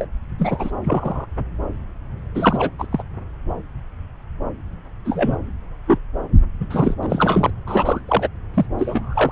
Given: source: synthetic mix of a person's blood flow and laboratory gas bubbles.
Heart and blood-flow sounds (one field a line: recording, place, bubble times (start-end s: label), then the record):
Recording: Doppler ultrasound of blood flow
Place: subclavian vein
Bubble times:
0.00-0.05 s: bubbles
0.38-0.71 s: bubbles
0.84-1.26 s: bubbles
2.35-2.71 s: bubbles
2.79-2.87 s: bubbles
2.90-3.02 s: bubbles
5.04-5.36 s: bubbles
5.88-5.99 s: bubbles
6.60-6.67 s: bubbles
6.70-6.95 s: bubbles
7.03-7.51 s: bubbles
7.66-8.01 s: bubbles
8.07-8.28 s: bubbles
8.54-8.66 s: bubbles
8.78-9.31 s: bubbles
From the record:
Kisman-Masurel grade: 232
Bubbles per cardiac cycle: several, 3 to 8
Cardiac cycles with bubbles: 50 to 99%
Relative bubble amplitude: moderate (0.250 to 0.450)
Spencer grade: 3 (all of the cardiac periods contain showers or single bubble signals, but not dominating or overriding the cardiac motion signals)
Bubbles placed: anywhere in the cardiac cycle